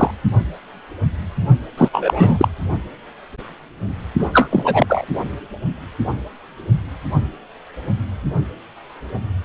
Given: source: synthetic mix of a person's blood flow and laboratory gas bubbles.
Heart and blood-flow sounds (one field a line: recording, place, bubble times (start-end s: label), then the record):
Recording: Doppler ultrasound of blood flow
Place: precordium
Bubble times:
0.00-0.11 s: bubbles
1.78-1.89 s: bubbles
1.93-2.48 s: bubbles
4.19-4.29 s: bubbles
4.32-5.06 s: bubbles
From the record:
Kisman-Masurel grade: 223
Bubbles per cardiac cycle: several, 3 to 8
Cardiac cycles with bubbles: 10 to 50%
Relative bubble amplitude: loud (0.450 to 0.775)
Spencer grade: 2 (many but less than half of the cardiac periods contain bubble signals, singularly or in groups)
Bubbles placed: only in the low amplitude regions of the cardiac cycle